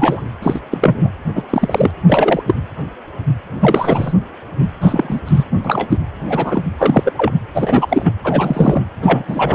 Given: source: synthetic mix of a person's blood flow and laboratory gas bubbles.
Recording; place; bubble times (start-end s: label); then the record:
Doppler ultrasound of blood flow; precordium
0.00-0.27 s: bubbles
0.42-0.59 s: bubbles
0.71-1.08 s: bubbles
1.35-1.44 s: bubbles
1.50-1.91 s: bubbles
2.07-2.43 s: bubbles
2.47-2.54 s: bubbles
3.60-4.13 s: bubbles
4.57-4.67 s: bubbles
4.80-5.21 s: bubbles
5.25-5.45 s: bubbles
5.64-5.97 s: bubbles
6.27-6.65 s: bubbles
6.77-7.12 s: bubbles
7.17-7.32 s: bubbles
7.54-8.11 s: bubbles
8.24-8.81 s: bubbles
9.02-9.54 s: bubbles
From the record:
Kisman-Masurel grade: 233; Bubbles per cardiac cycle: several, 3 to 8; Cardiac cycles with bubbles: 50 to 99%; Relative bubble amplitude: loud (0.450 to 0.775); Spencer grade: 3 (all of the cardiac periods contain showers or single bubble signals, but not dominating or overriding the cardiac motion signals); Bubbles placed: anywhere in the cardiac cycle